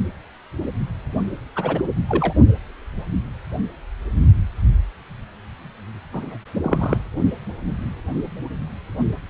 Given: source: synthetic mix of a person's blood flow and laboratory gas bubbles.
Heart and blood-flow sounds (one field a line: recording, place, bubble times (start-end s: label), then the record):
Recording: Doppler ultrasound of blood flow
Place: precordium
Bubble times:
1.55-1.82 s: bubbles
2.08-2.33 s: bubbles
6.12-6.38 s: bubbles
6.61-6.97 s: bubbles
From the record:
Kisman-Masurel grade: 122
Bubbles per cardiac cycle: 1 to 2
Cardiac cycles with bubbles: 10 to 50%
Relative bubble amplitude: moderate (0.250 to 0.450)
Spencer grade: 2 (many but less than half of the cardiac periods contain bubble signals, singularly or in groups)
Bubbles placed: only in the low amplitude regions of the cardiac cycle